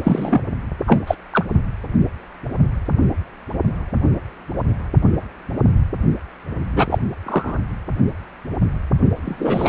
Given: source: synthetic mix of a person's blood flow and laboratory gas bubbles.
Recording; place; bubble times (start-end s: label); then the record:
Doppler ultrasound of blood flow; precordium
0.03-0.41 s: bubbles
0.86-1.00 s: bubbles
1.07-1.15 s: bubbles
1.33-1.45 s: bubbles
6.75-6.87 s: bubbles
6.89-6.99 s: bubbles
7.26-7.59 s: bubbles
9.25-9.68 s: bubbles
From the record:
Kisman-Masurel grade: 223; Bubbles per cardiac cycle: several, 3 to 8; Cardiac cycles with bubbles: 10 to 50%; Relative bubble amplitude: loud (0.450 to 0.775); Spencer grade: 2 (many but less than half of the cardiac periods contain bubble signals, singularly or in groups); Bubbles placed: only in the low amplitude regions of the cardiac cycle